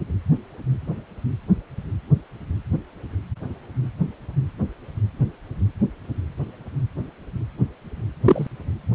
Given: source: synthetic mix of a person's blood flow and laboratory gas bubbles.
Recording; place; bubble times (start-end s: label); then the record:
Doppler ultrasound of blood flow; precordium
8.24-8.47 s: bubbles
From the record:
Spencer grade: 1 (occasional bubble signal discernible with the cardiac motion signal, with majority of cardiac periods free of bubbles); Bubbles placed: anywhere in the cardiac cycle